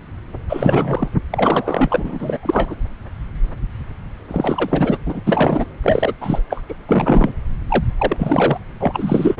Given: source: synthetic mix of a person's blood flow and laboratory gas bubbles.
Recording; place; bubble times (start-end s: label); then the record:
Doppler ultrasound of blood flow; subclavian vein
0.49-1.09 s: bubbles
1.31-2.38 s: bubbles
2.43-2.75 s: bubbles
4.30-4.97 s: bubbles
5.06-5.21 s: bubbles
5.25-5.65 s: bubbles
5.83-6.13 s: bubbles
6.21-6.41 s: bubbles
6.50-6.62 s: bubbles
6.69-6.74 s: bubbles
6.88-7.32 s: bubbles
7.68-7.84 s: bubbles
7.98-8.58 s: bubbles
8.79-9.40 s: bubbles
From the record:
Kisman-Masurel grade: 333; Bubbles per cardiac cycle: rolling drumbeat, 9 or more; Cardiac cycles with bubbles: 50 to 99%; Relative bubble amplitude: loud (0.450 to 0.775); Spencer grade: 3 (all of the cardiac periods contain showers or single bubble signals, but not dominating or overriding the cardiac motion signals); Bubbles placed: anywhere in the cardiac cycle